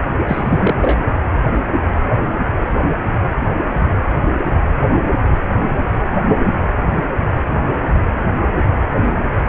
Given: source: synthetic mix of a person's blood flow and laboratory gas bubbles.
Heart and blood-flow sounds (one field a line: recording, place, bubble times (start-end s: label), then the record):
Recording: Doppler ultrasound of blood flow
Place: precordium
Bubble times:
0.28-0.99 s: bubbles
From the record:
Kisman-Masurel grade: 212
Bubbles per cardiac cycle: several, 3 to 8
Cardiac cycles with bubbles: 1 to 10%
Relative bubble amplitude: moderate (0.250 to 0.450)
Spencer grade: 1 (occasional bubble signal discernible with the cardiac motion signal, with majority of cardiac periods free of bubbles)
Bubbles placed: anywhere in the cardiac cycle